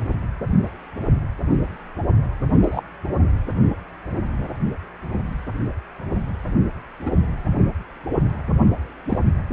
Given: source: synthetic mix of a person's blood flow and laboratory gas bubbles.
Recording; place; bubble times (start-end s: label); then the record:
Doppler ultrasound of blood flow; precordium
2.62-2.83 s: bubbles
7.06-7.11 s: bubbles
9.09-9.18 s: bubbles
From the record:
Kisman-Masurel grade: 122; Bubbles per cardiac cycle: 1 to 2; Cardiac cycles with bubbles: 10 to 50%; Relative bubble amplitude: moderate (0.250 to 0.450); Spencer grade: 2 (many but less than half of the cardiac periods contain bubble signals, singularly or in groups); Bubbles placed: anywhere in the cardiac cycle